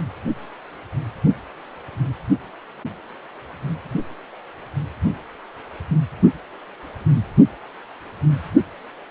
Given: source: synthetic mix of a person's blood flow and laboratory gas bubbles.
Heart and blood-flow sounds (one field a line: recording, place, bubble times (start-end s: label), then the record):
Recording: Doppler ultrasound of blood flow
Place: precordium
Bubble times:
no bubbles
From the record:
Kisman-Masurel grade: 000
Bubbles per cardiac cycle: 0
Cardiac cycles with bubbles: 0%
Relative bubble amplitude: no bubbles discernible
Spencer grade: 0 (complete lack of bubble signals)